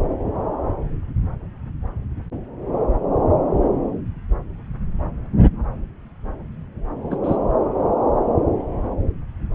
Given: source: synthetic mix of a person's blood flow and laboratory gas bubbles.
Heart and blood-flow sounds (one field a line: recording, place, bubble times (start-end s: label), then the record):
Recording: Doppler ultrasound of blood flow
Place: subclavian vein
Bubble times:
7.11-7.17 s: bubbles
7.23-7.37 s: bubbles
From the record:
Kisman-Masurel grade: 113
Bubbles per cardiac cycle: 1 to 2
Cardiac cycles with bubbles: 1 to 10%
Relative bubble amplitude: loud (0.450 to 0.775)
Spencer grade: 1 (occasional bubble signal discernible with the cardiac motion signal, with majority of cardiac periods free of bubbles)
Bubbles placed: anywhere in the cardiac cycle